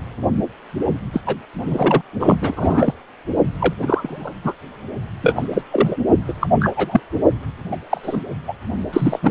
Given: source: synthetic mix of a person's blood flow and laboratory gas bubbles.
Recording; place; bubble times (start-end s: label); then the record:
Doppler ultrasound of blood flow; precordium
1.13-1.21 s: bubbles
1.26-1.36 s: bubbles
1.61-2.01 s: bubbles
2.20-2.36 s: bubbles
2.41-2.94 s: bubbles
3.59-3.74 s: bubbles
3.79-4.33 s: bubbles
4.44-4.53 s: bubbles
5.21-5.49 s: bubbles
5.53-5.62 s: bubbles
5.71-5.97 s: bubbles
6.28-6.33 s: bubbles
6.41-6.47 s: bubbles
6.60-6.71 s: bubbles
6.75-7.00 s: bubbles
7.71-7.77 s: bubbles
7.90-8.21 s: bubbles
8.47-8.53 s: bubbles
8.93-9.19 s: bubbles
9.22-9.31 s: bubbles
From the record:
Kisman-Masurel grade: 233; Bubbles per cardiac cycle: several, 3 to 8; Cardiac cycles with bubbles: 50 to 99%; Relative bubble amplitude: loud (0.450 to 0.775); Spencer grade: 3 (all of the cardiac periods contain showers or single bubble signals, but not dominating or overriding the cardiac motion signals); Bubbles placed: only in the low amplitude regions of the cardiac cycle